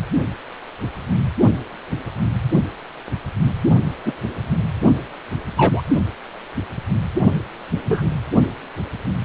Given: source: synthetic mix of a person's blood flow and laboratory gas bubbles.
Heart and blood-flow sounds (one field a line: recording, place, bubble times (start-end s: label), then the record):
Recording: Doppler ultrasound of blood flow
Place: precordium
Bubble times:
4.04-4.13 s: bubbles
5.57-5.82 s: bubbles
7.86-8.09 s: bubbles
From the record:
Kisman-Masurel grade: 123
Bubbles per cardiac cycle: 1 to 2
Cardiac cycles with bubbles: 10 to 50%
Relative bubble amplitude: loud (0.450 to 0.775)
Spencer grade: 2 (many but less than half of the cardiac periods contain bubble signals, singularly or in groups)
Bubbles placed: only in the low amplitude regions of the cardiac cycle